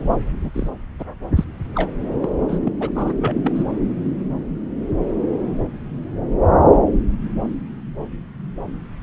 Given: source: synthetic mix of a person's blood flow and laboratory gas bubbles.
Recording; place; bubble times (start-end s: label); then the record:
Doppler ultrasound of blood flow; subclavian vein
0.40-0.51 s: bubbles
0.53-0.70 s: bubbles
0.99-1.05 s: bubbles
1.35-1.45 s: bubbles
1.75-1.90 s: bubbles
2.21-2.29 s: bubbles
2.48-2.72 s: bubbles
2.79-2.90 s: bubbles
2.95-3.13 s: bubbles
3.21-3.35 s: bubbles
3.44-3.63 s: bubbles
From the record:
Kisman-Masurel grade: 222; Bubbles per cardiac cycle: several, 3 to 8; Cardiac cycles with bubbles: 10 to 50%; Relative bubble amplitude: moderate (0.250 to 0.450); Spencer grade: 2 (many but less than half of the cardiac periods contain bubble signals, singularly or in groups); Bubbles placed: anywhere in the cardiac cycle